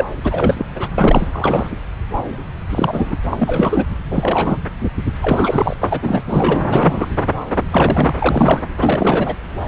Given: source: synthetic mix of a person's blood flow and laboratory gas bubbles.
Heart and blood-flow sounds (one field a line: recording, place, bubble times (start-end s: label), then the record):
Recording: Doppler ultrasound of blood flow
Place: subclavian vein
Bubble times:
0.00-0.05 s: bubbles
0.23-0.66 s: bubbles
0.74-1.28 s: bubbles
1.32-1.72 s: bubbles
2.69-3.17 s: bubbles
3.30-3.86 s: bubbles
4.10-4.58 s: bubbles
5.22-5.75 s: bubbles
5.80-6.21 s: bubbles
6.26-6.64 s: bubbles
6.71-7.09 s: bubbles
7.71-8.65 s: bubbles
8.79-9.35 s: bubbles
From the record:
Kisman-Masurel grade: 333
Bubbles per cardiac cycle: rolling drumbeat, 9 or more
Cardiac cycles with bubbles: 50 to 99%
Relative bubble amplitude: loud (0.450 to 0.775)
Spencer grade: 3 (all of the cardiac periods contain showers or single bubble signals, but not dominating or overriding the cardiac motion signals)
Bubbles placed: anywhere in the cardiac cycle